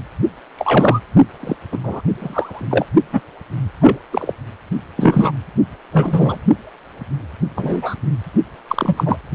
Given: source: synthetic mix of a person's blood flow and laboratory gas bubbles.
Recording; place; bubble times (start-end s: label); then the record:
Doppler ultrasound of blood flow; precordium
0.57-1.00 s: bubbles
1.40-1.56 s: bubbles
1.71-1.78 s: bubbles
1.83-2.01 s: bubbles
2.19-2.65 s: bubbles
2.70-2.85 s: bubbles
3.12-3.21 s: bubbles
3.81-3.98 s: bubbles
4.12-4.33 s: bubbles
4.97-5.32 s: bubbles
5.93-6.39 s: bubbles
7.56-7.95 s: bubbles
8.67-9.18 s: bubbles
From the record:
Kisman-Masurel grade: 233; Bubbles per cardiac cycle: several, 3 to 8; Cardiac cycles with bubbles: 50 to 99%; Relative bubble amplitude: loud (0.450 to 0.775); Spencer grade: 3 (all of the cardiac periods contain showers or single bubble signals, but not dominating or overriding the cardiac motion signals); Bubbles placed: only in the low amplitude regions of the cardiac cycle